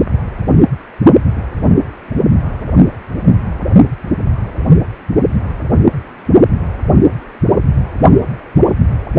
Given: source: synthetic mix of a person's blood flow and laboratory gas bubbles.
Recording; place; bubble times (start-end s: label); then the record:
Doppler ultrasound of blood flow; precordium
no bubbles
From the record:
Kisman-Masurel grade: 000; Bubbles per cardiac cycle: 0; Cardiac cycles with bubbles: 0%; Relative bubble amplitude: no bubbles discernible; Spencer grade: 0 (complete lack of bubble signals)